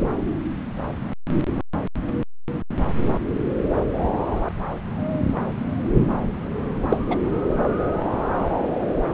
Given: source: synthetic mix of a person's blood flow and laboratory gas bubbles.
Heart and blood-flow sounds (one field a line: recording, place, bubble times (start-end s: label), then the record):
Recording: Doppler ultrasound of blood flow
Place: subclavian vein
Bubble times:
6.90-6.98 s: bubbles
7.09-7.17 s: bubbles
From the record:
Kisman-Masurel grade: 112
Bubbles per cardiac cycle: 1 to 2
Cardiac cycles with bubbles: 1 to 10%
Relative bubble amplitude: moderate (0.250 to 0.450)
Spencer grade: 1 (occasional bubble signal discernible with the cardiac motion signal, with majority of cardiac periods free of bubbles)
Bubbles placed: anywhere in the cardiac cycle